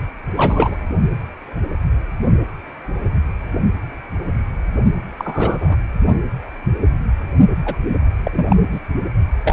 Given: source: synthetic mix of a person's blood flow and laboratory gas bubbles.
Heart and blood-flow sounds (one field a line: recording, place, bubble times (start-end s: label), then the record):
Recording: Doppler ultrasound of blood flow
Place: precordium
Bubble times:
0.35-0.78 s: bubbles
5.17-5.78 s: bubbles
7.65-7.77 s: bubbles
7.88-7.98 s: bubbles
8.23-8.56 s: bubbles
8.71-8.80 s: bubbles
9.44-9.53 s: bubbles
From the record:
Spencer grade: 2 (many but less than half of the cardiac periods contain bubble signals, singularly or in groups)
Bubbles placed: only in the low amplitude regions of the cardiac cycle